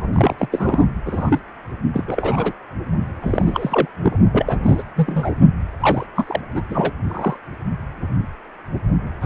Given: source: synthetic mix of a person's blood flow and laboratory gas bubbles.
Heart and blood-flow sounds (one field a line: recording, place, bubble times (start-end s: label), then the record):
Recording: Doppler ultrasound of blood flow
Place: precordium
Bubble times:
0.00-0.08 s: bubbles
0.12-0.48 s: bubbles
0.52-0.87 s: bubbles
1.06-1.40 s: bubbles
1.94-2.04 s: bubbles
2.07-2.52 s: bubbles
3.21-3.89 s: bubbles
4.02-4.18 s: bubbles
4.32-4.58 s: bubbles
4.63-4.83 s: bubbles
4.96-5.32 s: bubbles
5.80-6.06 s: bubbles
6.16-6.41 s: bubbles
6.54-6.62 s: bubbles
6.69-6.95 s: bubbles
7.08-7.36 s: bubbles
9.21-9.26 s: bubbles
From the record:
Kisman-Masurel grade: 332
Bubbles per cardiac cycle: rolling drumbeat, 9 or more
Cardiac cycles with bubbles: 50 to 99%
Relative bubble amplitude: moderate (0.250 to 0.450)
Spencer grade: 3 (all of the cardiac periods contain showers or single bubble signals, but not dominating or overriding the cardiac motion signals)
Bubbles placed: only in the low amplitude regions of the cardiac cycle